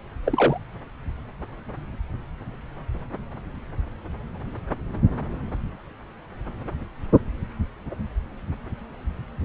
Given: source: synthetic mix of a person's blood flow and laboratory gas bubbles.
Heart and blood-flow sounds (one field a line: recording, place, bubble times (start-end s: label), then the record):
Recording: Doppler ultrasound of blood flow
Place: subclavian vein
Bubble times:
0.26-0.60 s: bubbles
From the record:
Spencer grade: 1 (occasional bubble signal discernible with the cardiac motion signal, with majority of cardiac periods free of bubbles)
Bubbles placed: anywhere in the cardiac cycle